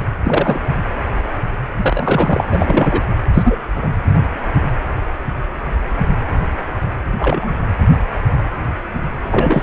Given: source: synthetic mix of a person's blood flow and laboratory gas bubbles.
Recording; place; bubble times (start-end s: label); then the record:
Doppler ultrasound of blood flow; precordium
0.24-0.58 s: bubbles
1.78-2.43 s: bubbles
2.50-3.03 s: bubbles
3.33-3.56 s: bubbles
3.75-3.89 s: bubbles
7.18-7.54 s: bubbles
9.31-9.63 s: bubbles
From the record:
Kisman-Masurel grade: 223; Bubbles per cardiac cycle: several, 3 to 8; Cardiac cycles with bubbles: 10 to 50%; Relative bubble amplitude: loud (0.450 to 0.775); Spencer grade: 2 (many but less than half of the cardiac periods contain bubble signals, singularly or in groups); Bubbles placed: anywhere in the cardiac cycle